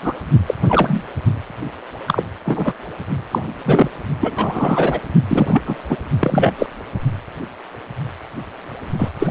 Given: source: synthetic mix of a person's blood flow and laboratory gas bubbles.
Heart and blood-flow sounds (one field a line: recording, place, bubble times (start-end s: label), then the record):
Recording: Doppler ultrasound of blood flow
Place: precordium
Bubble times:
0.02-0.14 s: bubbles
0.46-0.54 s: bubbles
0.64-1.04 s: bubbles
2.07-2.23 s: bubbles
2.45-2.73 s: bubbles
3.31-3.44 s: bubbles
3.65-3.89 s: bubbles
4.20-4.99 s: bubbles
5.29-5.62 s: bubbles
5.65-5.84 s: bubbles
5.89-5.97 s: bubbles
6.20-6.53 s: bubbles
6.58-6.66 s: bubbles
8.98-9.09 s: bubbles
9.18-9.30 s: bubbles
From the record:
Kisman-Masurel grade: 233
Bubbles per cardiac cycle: several, 3 to 8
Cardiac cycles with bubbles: 50 to 99%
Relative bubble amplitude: loud (0.450 to 0.775)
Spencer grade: 3 (all of the cardiac periods contain showers or single bubble signals, but not dominating or overriding the cardiac motion signals)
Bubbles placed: only in the low amplitude regions of the cardiac cycle